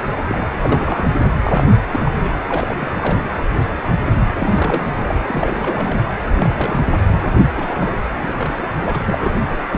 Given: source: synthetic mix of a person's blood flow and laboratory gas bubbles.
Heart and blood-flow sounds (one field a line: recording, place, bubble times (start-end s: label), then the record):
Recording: Doppler ultrasound of blood flow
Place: precordium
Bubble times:
0.28-0.47 s: bubbles
0.59-1.08 s: bubbles
1.19-1.37 s: bubbles
1.45-1.67 s: bubbles
1.77-1.82 s: bubbles
1.92-2.15 s: bubbles
2.21-2.32 s: bubbles
2.48-2.88 s: bubbles
2.97-3.23 s: bubbles
4.39-5.20 s: bubbles
5.28-6.03 s: bubbles
6.38-6.50 s: bubbles
6.57-6.98 s: bubbles
7.55-7.96 s: bubbles
8.14-8.63 s: bubbles
8.79-9.31 s: bubbles
9.71-9.78 s: bubbles
From the record:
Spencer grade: 3 (all of the cardiac periods contain showers or single bubble signals, but not dominating or overriding the cardiac motion signals)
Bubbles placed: anywhere in the cardiac cycle